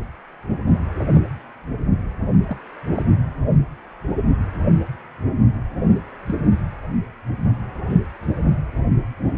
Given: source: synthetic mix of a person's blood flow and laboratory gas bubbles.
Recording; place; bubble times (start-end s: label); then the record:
Doppler ultrasound of blood flow; precordium
2.48-2.56 s: bubbles
2.95-3.02 s: bubbles
6.26-6.35 s: bubbles
7.89-7.96 s: bubbles
From the record:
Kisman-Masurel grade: 121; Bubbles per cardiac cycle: 1 to 2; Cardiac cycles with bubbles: 10 to 50%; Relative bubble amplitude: barely perceptible (0.100 to 0.250); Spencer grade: 2 (many but less than half of the cardiac periods contain bubble signals, singularly or in groups); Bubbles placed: anywhere in the cardiac cycle